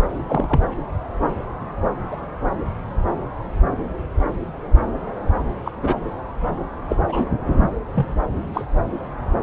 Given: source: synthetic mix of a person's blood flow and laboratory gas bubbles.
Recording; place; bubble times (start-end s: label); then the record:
Doppler ultrasound of blood flow; subclavian vein
0.28-0.60 s: bubbles
2.10-2.16 s: bubbles
5.65-5.71 s: bubbles
5.81-5.95 s: bubbles
6.89-6.96 s: bubbles
7.07-7.25 s: bubbles
7.95-8.11 s: bubbles
8.54-8.67 s: bubbles
From the record:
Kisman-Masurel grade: 122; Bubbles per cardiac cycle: 1 to 2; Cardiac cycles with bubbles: 10 to 50%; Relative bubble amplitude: moderate (0.250 to 0.450); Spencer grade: 2 (many but less than half of the cardiac periods contain bubble signals, singularly or in groups); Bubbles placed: anywhere in the cardiac cycle